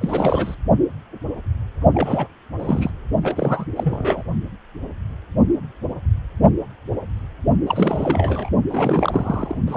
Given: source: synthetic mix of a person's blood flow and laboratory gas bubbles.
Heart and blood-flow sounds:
Doppler ultrasound of blood flow; precordium
0.00-0.55 s: bubbles
1.93-2.27 s: bubbles
2.59-2.90 s: bubbles
3.23-3.65 s: bubbles
3.76-4.23 s: bubbles
7.67-8.49 s: bubbles
8.69-9.57 s: bubbles
9.68-9.77 s: bubbles
From the record:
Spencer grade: 3 (all of the cardiac periods contain showers or single bubble signals, but not dominating or overriding the cardiac motion signals); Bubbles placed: only in the low amplitude regions of the cardiac cycle

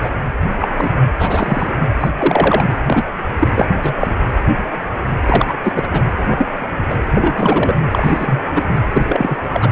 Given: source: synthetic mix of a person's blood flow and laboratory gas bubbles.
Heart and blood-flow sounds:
Doppler ultrasound of blood flow; precordium
0.00-0.10 s: bubbles
0.59-0.69 s: bubbles
0.77-0.91 s: bubbles
1.19-1.72 s: bubbles
2.00-2.10 s: bubbles
2.18-2.65 s: bubbles
2.87-3.11 s: bubbles
3.39-3.48 s: bubbles
3.54-3.65 s: bubbles
3.79-3.94 s: bubbles
4.00-4.16 s: bubbles
5.25-5.54 s: bubbles
5.62-5.72 s: bubbles
5.75-5.89 s: bubbles
5.92-6.01 s: bubbles
6.28-6.47 s: bubbles
6.61-6.68 s: bubbles
6.89-6.97 s: bubbles
7.13-7.80 s: bubbles
7.91-8.43 s: bubbles
8.51-8.62 s: bubbles
8.94-9.02 s: bubbles
9.04-9.36 s: bubbles
9.53-9.71 s: bubbles
From the record:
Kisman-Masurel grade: 233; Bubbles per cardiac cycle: several, 3 to 8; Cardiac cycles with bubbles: 50 to 99%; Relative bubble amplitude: loud (0.450 to 0.775); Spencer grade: 3 (all of the cardiac periods contain showers or single bubble signals, but not dominating or overriding the cardiac motion signals); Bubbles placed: anywhere in the cardiac cycle

